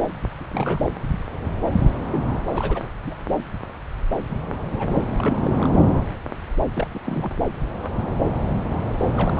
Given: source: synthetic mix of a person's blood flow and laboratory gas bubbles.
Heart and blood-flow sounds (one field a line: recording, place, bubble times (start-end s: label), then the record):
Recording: Doppler ultrasound of blood flow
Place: subclavian vein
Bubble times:
0.40-0.44 s: bubbles
0.53-0.91 s: bubbles
2.13-2.23 s: bubbles
2.47-2.82 s: bubbles
3.04-3.14 s: bubbles
3.27-3.36 s: bubbles
4.30-4.37 s: bubbles
4.42-5.03 s: bubbles
5.18-5.69 s: bubbles
6.75-6.87 s: bubbles
6.91-7.31 s: bubbles
9.16-9.40 s: bubbles
From the record:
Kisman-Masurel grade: 221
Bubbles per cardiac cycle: several, 3 to 8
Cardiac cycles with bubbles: 10 to 50%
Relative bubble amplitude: barely perceptible (0.100 to 0.250)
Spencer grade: 2 (many but less than half of the cardiac periods contain bubble signals, singularly or in groups)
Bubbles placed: anywhere in the cardiac cycle